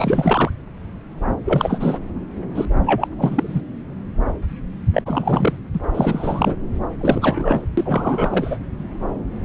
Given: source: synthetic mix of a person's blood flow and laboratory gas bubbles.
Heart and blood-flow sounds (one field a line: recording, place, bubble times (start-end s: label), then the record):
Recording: Doppler ultrasound of blood flow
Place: subclavian vein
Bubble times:
0.00-0.50 s: bubbles
1.45-1.99 s: bubbles
2.54-2.66 s: bubbles
2.86-3.08 s: bubbles
3.18-3.62 s: bubbles
4.94-5.03 s: bubbles
5.06-5.58 s: bubbles
5.73-5.80 s: bubbles
5.94-6.56 s: bubbles
7.00-7.61 s: bubbles
7.77-8.58 s: bubbles
From the record:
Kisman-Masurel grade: 333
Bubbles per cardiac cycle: rolling drumbeat, 9 or more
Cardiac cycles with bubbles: 50 to 99%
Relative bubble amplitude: loud (0.450 to 0.775)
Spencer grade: 3 (all of the cardiac periods contain showers or single bubble signals, but not dominating or overriding the cardiac motion signals)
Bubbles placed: anywhere in the cardiac cycle